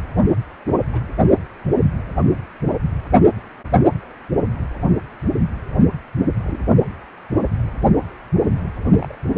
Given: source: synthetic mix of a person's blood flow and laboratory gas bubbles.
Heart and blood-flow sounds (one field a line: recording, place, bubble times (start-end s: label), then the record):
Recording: Doppler ultrasound of blood flow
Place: precordium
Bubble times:
0.92-1.00 s: bubbles
6.43-6.69 s: bubbles
8.55-8.67 s: bubbles
8.99-9.15 s: bubbles
From the record:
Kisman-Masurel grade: 121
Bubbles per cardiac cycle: 1 to 2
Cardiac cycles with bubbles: 10 to 50%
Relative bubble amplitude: barely perceptible (0.100 to 0.250)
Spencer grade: 2 (many but less than half of the cardiac periods contain bubble signals, singularly or in groups)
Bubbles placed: only in the low amplitude regions of the cardiac cycle